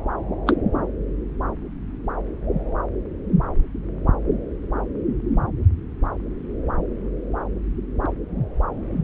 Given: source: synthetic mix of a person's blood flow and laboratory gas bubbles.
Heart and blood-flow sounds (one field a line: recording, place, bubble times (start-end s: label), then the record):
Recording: Doppler ultrasound of blood flow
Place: subclavian vein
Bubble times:
0.47-0.55 s: bubbles
From the record:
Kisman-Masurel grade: 112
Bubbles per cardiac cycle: 1 to 2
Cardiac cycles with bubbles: 1 to 10%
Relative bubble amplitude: moderate (0.250 to 0.450)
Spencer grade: 1 (occasional bubble signal discernible with the cardiac motion signal, with majority of cardiac periods free of bubbles)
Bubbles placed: anywhere in the cardiac cycle